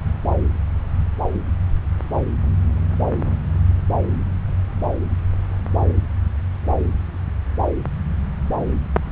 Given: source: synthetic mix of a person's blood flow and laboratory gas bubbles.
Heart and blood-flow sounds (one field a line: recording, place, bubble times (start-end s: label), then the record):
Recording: Doppler ultrasound of blood flow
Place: subclavian vein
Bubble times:
no bubbles
From the record:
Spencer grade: 0 (complete lack of bubble signals)